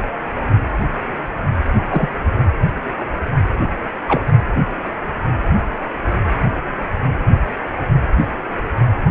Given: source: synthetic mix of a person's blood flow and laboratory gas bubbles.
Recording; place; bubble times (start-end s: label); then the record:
Doppler ultrasound of blood flow; precordium
1.91-2.08 s: bubbles
4.08-4.25 s: bubbles
From the record:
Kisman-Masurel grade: 122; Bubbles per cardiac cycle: 1 to 2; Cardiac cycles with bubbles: 10 to 50%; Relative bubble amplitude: moderate (0.250 to 0.450); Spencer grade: 2 (many but less than half of the cardiac periods contain bubble signals, singularly or in groups); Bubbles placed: anywhere in the cardiac cycle